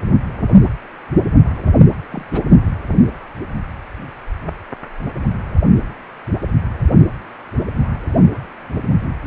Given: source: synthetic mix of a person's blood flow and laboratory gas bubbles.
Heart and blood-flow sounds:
Doppler ultrasound of blood flow; precordium
2.11-2.24 s: bubbles
2.32-2.40 s: bubbles
From the record:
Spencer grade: 2 (many but less than half of the cardiac periods contain bubble signals, singularly or in groups); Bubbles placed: only in the low amplitude regions of the cardiac cycle

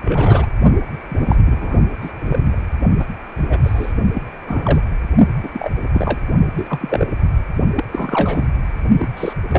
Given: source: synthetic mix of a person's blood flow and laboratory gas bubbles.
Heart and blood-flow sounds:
Doppler ultrasound of blood flow; precordium
0.02-0.47 s: bubbles
1.09-1.39 s: bubbles
1.46-1.79 s: bubbles
2.02-2.12 s: bubbles
2.20-2.56 s: bubbles
2.99-3.05 s: bubbles
3.37-3.60 s: bubbles
3.63-3.93 s: bubbles
4.15-4.25 s: bubbles
4.44-4.81 s: bubbles
5.43-5.49 s: bubbles
5.52-5.72 s: bubbles
5.92-6.21 s: bubbles
6.56-7.06 s: bubbles
7.75-7.84 s: bubbles
7.91-8.46 s: bubbles
8.99-9.33 s: bubbles
9.51-9.59 s: bubbles
From the record:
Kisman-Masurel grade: 243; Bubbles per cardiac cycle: several, 3 to 8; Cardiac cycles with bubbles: 100%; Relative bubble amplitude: loud (0.450 to 0.775); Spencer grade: 3 (all of the cardiac periods contain showers or single bubble signals, but not dominating or overriding the cardiac motion signals); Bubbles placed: only in the low amplitude regions of the cardiac cycle

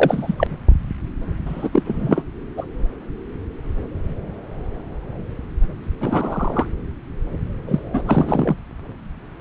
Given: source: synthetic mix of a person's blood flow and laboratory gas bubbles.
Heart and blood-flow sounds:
Doppler ultrasound of blood flow; subclavian vein
0.00-0.47 s: bubbles
1.46-1.70 s: bubbles
1.73-2.24 s: bubbles
2.57-2.65 s: bubbles
6.00-6.67 s: bubbles
7.67-7.79 s: bubbles
7.93-8.03 s: bubbles
8.07-8.56 s: bubbles
From the record:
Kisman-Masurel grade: 223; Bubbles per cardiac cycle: several, 3 to 8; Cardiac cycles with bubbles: 10 to 50%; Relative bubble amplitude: loud (0.450 to 0.775); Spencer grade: 2 (many but less than half of the cardiac periods contain bubble signals, singularly or in groups); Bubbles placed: anywhere in the cardiac cycle

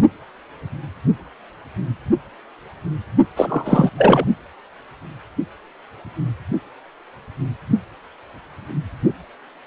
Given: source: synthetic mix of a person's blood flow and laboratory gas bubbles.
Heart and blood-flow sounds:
Doppler ultrasound of blood flow; precordium
3.36-3.90 s: bubbles
3.97-4.26 s: bubbles
From the record:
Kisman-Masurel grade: 213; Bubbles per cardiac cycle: several, 3 to 8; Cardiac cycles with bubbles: 1 to 10%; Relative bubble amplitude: loud (0.450 to 0.775); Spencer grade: 1 (occasional bubble signal discernible with the cardiac motion signal, with majority of cardiac periods free of bubbles); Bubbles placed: only in the low amplitude regions of the cardiac cycle

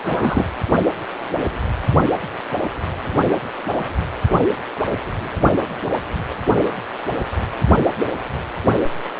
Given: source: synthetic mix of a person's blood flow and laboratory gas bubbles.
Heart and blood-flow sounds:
Doppler ultrasound of blood flow; precordium
0.04-0.44 s: bubbles
From the record:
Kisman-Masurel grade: 213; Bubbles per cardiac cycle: several, 3 to 8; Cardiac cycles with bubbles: 1 to 10%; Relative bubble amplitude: loud (0.450 to 0.775); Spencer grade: 1 (occasional bubble signal discernible with the cardiac motion signal, with majority of cardiac periods free of bubbles); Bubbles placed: anywhere in the cardiac cycle

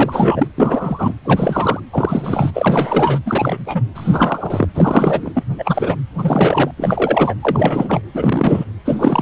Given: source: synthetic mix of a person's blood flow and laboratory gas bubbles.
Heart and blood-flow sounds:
Doppler ultrasound of blood flow; precordium
0.00-0.47 s: bubbles
0.56-1.13 s: bubbles
1.25-1.80 s: bubbles
1.92-2.51 s: bubbles
2.54-3.19 s: bubbles
3.25-3.81 s: bubbles
3.94-4.66 s: bubbles
4.74-5.32 s: bubbles
5.35-5.43 s: bubbles
5.58-5.96 s: bubbles
6.17-6.71 s: bubbles
6.77-7.34 s: bubbles
7.41-8.02 s: bubbles
8.13-8.65 s: bubbles
8.85-9.22 s: bubbles
From the record:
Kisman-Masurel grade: 343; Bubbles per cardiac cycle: rolling drumbeat, 9 or more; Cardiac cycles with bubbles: 100%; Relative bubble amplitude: loud (0.450 to 0.775); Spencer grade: 3 (all of the cardiac periods contain showers or single bubble signals, but not dominating or overriding the cardiac motion signals); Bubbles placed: anywhere in the cardiac cycle

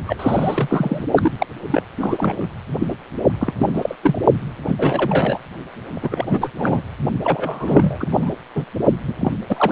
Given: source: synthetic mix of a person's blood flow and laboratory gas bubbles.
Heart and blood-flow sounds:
Doppler ultrasound of blood flow; precordium
0.06-0.16 s: bubbles
0.19-1.05 s: bubbles
1.16-1.30 s: bubbles
1.38-1.47 s: bubbles
1.70-1.82 s: bubbles
1.98-2.46 s: bubbles
2.79-2.87 s: bubbles
2.90-2.94 s: bubbles
3.40-3.53 s: bubbles
3.58-3.95 s: bubbles
4.03-4.21 s: bubbles
4.67-5.38 s: bubbles
5.93-6.49 s: bubbles
6.57-6.81 s: bubbles
7.23-7.96 s: bubbles
8.00-8.08 s: bubbles
8.11-8.30 s: bubbles
8.55-8.65 s: bubbles
9.07-9.13 s: bubbles
9.21-9.32 s: bubbles
9.49-9.72 s: bubbles
From the record:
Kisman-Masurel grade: 342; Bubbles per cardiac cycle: rolling drumbeat, 9 or more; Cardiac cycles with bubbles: 100%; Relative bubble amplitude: moderate (0.250 to 0.450); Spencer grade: 3 (all of the cardiac periods contain showers or single bubble signals, but not dominating or overriding the cardiac motion signals); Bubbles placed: only in the low amplitude regions of the cardiac cycle

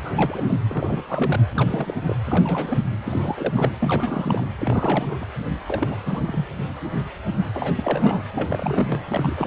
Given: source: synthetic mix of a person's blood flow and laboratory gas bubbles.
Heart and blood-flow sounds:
Doppler ultrasound of blood flow; precordium
0.00-0.59 s: bubbles
0.68-1.02 s: bubbles
1.07-1.40 s: bubbles
1.54-1.94 s: bubbles
2.06-2.16 s: bubbles
2.25-2.83 s: bubbles
3.05-3.72 s: bubbles
3.79-4.48 s: bubbles
4.58-5.26 s: bubbles
5.68-6.46 s: bubbles
7.54-8.22 s: bubbles
8.35-9.01 s: bubbles
9.07-9.47 s: bubbles
From the record:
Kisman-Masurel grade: 332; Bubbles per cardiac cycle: rolling drumbeat, 9 or more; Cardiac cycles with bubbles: 50 to 99%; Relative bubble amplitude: moderate (0.250 to 0.450); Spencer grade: 3 (all of the cardiac periods contain showers or single bubble signals, but not dominating or overriding the cardiac motion signals); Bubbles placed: anywhere in the cardiac cycle

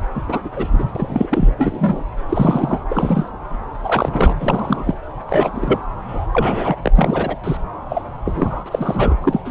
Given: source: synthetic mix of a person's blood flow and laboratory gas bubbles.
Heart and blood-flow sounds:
Doppler ultrasound of blood flow; subclavian vein
0.15-0.22 s: bubbles
0.28-0.40 s: bubbles
0.45-0.49 s: bubbles
0.52-0.86 s: bubbles
0.95-1.51 s: bubbles
1.57-2.04 s: bubbles
2.29-2.81 s: bubbles
2.89-3.30 s: bubbles
3.83-4.35 s: bubbles
4.40-4.95 s: bubbles
5.27-5.79 s: bubbles
6.08-6.27 s: bubbles
6.32-6.76 s: bubbles
6.82-6.90 s: bubbles
6.95-7.36 s: bubbles
7.44-7.57 s: bubbles
7.89-8.04 s: bubbles
8.24-9.16 s: bubbles
9.21-9.51 s: bubbles
From the record:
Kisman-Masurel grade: 242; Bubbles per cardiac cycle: several, 3 to 8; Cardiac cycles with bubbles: 100%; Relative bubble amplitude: moderate (0.250 to 0.450); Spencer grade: 3 (all of the cardiac periods contain showers or single bubble signals, but not dominating or overriding the cardiac motion signals); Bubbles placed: anywhere in the cardiac cycle

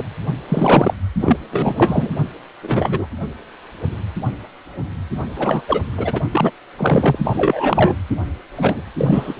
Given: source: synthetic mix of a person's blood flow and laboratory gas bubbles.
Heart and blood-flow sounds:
Doppler ultrasound of blood flow; precordium
0.00-0.03 s: bubbles
0.49-0.94 s: bubbles
1.19-1.36 s: bubbles
1.51-2.11 s: bubbles
2.62-3.06 s: bubbles
5.35-5.62 s: bubbles
5.67-5.81 s: bubbles
5.97-6.21 s: bubbles
6.31-6.51 s: bubbles
6.77-7.17 s: bubbles
7.24-7.95 s: bubbles
8.56-8.83 s: bubbles
8.97-9.33 s: bubbles
From the record:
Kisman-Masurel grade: 233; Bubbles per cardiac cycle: several, 3 to 8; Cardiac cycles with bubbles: 50 to 99%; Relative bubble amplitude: loud (0.450 to 0.775); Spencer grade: 3 (all of the cardiac periods contain showers or single bubble signals, but not dominating or overriding the cardiac motion signals); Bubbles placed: only in the low amplitude regions of the cardiac cycle

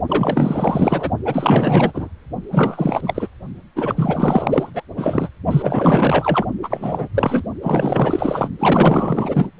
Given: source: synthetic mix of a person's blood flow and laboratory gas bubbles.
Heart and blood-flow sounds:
Doppler ultrasound of blood flow; precordium
0.08-1.10 s: bubbles
1.25-2.09 s: bubbles
2.52-3.28 s: bubbles
3.75-4.71 s: bubbles
4.74-4.83 s: bubbles
4.96-5.29 s: bubbles
5.50-6.45 s: bubbles
6.62-7.08 s: bubbles
7.14-7.43 s: bubbles
7.62-8.49 s: bubbles
8.59-9.50 s: bubbles
From the record:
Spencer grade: 4 (maximum detectable bubble signal sounding continuously throughout systole and diastole of every cardiac period, and overriding the amplitude of the normal cardiac signals); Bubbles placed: only in the low amplitude regions of the cardiac cycle

